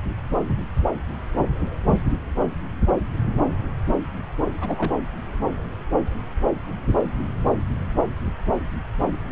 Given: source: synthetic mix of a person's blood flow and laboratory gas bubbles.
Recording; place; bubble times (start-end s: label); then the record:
Doppler ultrasound of blood flow; subclavian vein
4.61-4.92 s: bubbles
From the record:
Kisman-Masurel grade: 211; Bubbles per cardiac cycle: several, 3 to 8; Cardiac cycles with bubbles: 1 to 10%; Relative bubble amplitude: barely perceptible (0.100 to 0.250); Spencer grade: 1 (occasional bubble signal discernible with the cardiac motion signal, with majority of cardiac periods free of bubbles); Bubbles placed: anywhere in the cardiac cycle